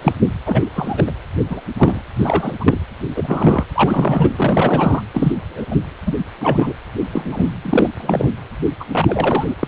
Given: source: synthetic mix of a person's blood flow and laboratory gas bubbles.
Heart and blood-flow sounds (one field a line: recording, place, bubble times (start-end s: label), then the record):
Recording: Doppler ultrasound of blood flow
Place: precordium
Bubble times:
0.02-0.13 s: bubbles
0.45-0.68 s: bubbles
0.73-1.04 s: bubbles
1.06-1.11 s: bubbles
1.50-1.61 s: bubbles
1.78-2.01 s: bubbles
2.16-2.54 s: bubbles
2.60-2.77 s: bubbles
3.16-3.64 s: bubbles
3.75-4.30 s: bubbles
4.36-5.03 s: bubbles
5.13-5.33 s: bubbles
5.42-5.65 s: bubbles
5.71-5.75 s: bubbles
6.06-6.14 s: bubbles
6.41-6.72 s: bubbles
7.12-7.48 s: bubbles
7.65-7.90 s: bubbles
7.98-8.32 s: bubbles
8.79-8.84 s: bubbles
8.91-9.46 s: bubbles
9.59-9.67 s: bubbles
From the record:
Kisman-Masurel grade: 243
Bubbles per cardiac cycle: several, 3 to 8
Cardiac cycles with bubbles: 100%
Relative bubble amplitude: loud (0.450 to 0.775)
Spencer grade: 3 (all of the cardiac periods contain showers or single bubble signals, but not dominating or overriding the cardiac motion signals)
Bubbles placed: anywhere in the cardiac cycle